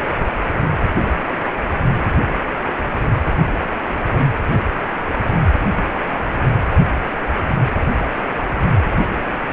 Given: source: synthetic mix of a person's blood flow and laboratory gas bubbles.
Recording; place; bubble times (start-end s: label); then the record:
Doppler ultrasound of blood flow; precordium
no bubbles
From the record:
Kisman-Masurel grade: 000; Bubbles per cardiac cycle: 0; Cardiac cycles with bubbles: 0%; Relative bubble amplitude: no bubbles discernible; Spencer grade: 0 (complete lack of bubble signals)